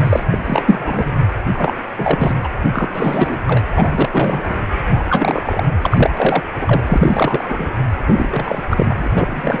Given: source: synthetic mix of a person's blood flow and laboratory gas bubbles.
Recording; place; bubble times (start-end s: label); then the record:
Doppler ultrasound of blood flow; precordium
0.00-0.24 s: bubbles
0.30-1.19 s: bubbles
1.52-1.74 s: bubbles
1.98-2.34 s: bubbles
2.42-2.48 s: bubbles
2.73-2.89 s: bubbles
2.93-3.44 s: bubbles
3.46-3.66 s: bubbles
3.75-4.09 s: bubbles
4.12-4.44 s: bubbles
4.49-4.55 s: bubbles
4.88-5.04 s: bubbles
5.09-5.63 s: bubbles
5.82-6.10 s: bubbles
6.17-6.44 s: bubbles
6.61-6.83 s: bubbles
6.87-7.75 s: bubbles
8.06-8.63 s: bubbles
8.69-9.10 s: bubbles
9.15-9.60 s: bubbles
From the record:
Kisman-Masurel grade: 343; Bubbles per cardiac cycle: rolling drumbeat, 9 or more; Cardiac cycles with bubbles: 100%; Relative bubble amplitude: loud (0.450 to 0.775); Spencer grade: 3 (all of the cardiac periods contain showers or single bubble signals, but not dominating or overriding the cardiac motion signals); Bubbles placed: anywhere in the cardiac cycle